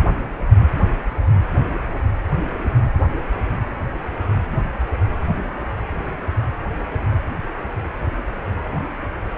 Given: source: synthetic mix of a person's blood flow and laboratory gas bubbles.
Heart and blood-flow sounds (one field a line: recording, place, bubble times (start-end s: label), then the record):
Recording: Doppler ultrasound of blood flow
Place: precordium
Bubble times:
5.29-5.58 s: bubbles
From the record:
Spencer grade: 1 (occasional bubble signal discernible with the cardiac motion signal, with majority of cardiac periods free of bubbles)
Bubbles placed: anywhere in the cardiac cycle